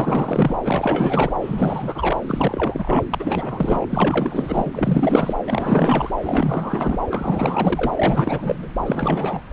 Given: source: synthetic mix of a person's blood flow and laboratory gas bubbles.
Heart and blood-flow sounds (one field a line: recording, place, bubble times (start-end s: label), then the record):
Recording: Doppler ultrasound of blood flow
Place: subclavian vein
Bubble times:
0.00-0.56 s: bubbles
0.63-1.34 s: bubbles
1.41-2.19 s: bubbles
2.27-3.04 s: bubbles
3.11-3.86 s: bubbles
3.90-4.71 s: bubbles
4.73-5.34 s: bubbles
5.46-6.11 s: bubbles
6.23-6.98 s: bubbles
7.10-7.92 s: bubbles
7.96-8.67 s: bubbles
8.86-9.42 s: bubbles
9.50-9.53 s: bubbles
From the record:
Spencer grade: 4 (maximum detectable bubble signal sounding continuously throughout systole and diastole of every cardiac period, and overriding the amplitude of the normal cardiac signals)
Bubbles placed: anywhere in the cardiac cycle